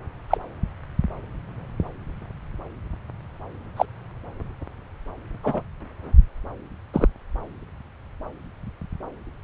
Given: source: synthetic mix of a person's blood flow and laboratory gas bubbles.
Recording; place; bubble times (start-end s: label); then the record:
Doppler ultrasound of blood flow; subclavian vein
0.29-0.38 s: bubbles
3.76-3.85 s: bubbles
5.43-5.62 s: bubbles
6.93-7.08 s: bubbles
From the record:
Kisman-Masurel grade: 123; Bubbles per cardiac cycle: 1 to 2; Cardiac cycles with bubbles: 10 to 50%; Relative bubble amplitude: loud (0.450 to 0.775); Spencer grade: 2 (many but less than half of the cardiac periods contain bubble signals, singularly or in groups); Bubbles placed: anywhere in the cardiac cycle